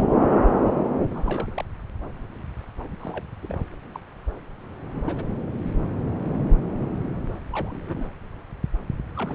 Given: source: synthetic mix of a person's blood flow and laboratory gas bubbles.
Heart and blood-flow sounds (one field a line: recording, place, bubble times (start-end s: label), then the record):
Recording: Doppler ultrasound of blood flow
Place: subclavian vein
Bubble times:
1.10-1.64 s: bubbles
2.80-2.83 s: bubbles
2.88-2.96 s: bubbles
3.00-3.23 s: bubbles
3.42-3.58 s: bubbles
3.94-3.99 s: bubbles
4.95-5.02 s: bubbles
5.07-5.25 s: bubbles
5.29-5.35 s: bubbles
7.52-8.09 s: bubbles
9.16-9.35 s: bubbles
From the record:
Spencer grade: 2 (many but less than half of the cardiac periods contain bubble signals, singularly or in groups)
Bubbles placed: anywhere in the cardiac cycle